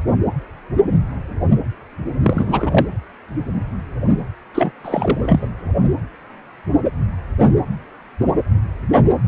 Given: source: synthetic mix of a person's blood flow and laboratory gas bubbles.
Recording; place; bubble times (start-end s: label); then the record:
Doppler ultrasound of blood flow; precordium
2.23-2.86 s: bubbles
4.54-4.73 s: bubbles
4.84-5.49 s: bubbles
From the record:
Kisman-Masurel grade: 213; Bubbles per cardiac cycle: several, 3 to 8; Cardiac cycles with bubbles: 1 to 10%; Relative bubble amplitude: loud (0.450 to 0.775); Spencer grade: 1 (occasional bubble signal discernible with the cardiac motion signal, with majority of cardiac periods free of bubbles); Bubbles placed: anywhere in the cardiac cycle